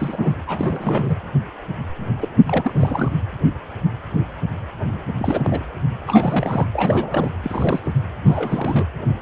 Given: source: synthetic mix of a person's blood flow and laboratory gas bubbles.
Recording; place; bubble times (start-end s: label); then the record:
Doppler ultrasound of blood flow; precordium
0.00-0.36 s: bubbles
0.47-1.19 s: bubbles
2.21-2.29 s: bubbles
2.47-3.11 s: bubbles
5.18-5.64 s: bubbles
6.07-6.67 s: bubbles
6.74-7.30 s: bubbles
7.43-7.80 s: bubbles
7.83-7.92 s: bubbles
8.25-8.85 s: bubbles
From the record:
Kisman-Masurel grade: 332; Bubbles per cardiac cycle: rolling drumbeat, 9 or more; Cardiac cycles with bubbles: 50 to 99%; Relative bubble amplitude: moderate (0.250 to 0.450); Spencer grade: 3 (all of the cardiac periods contain showers or single bubble signals, but not dominating or overriding the cardiac motion signals); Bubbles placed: anywhere in the cardiac cycle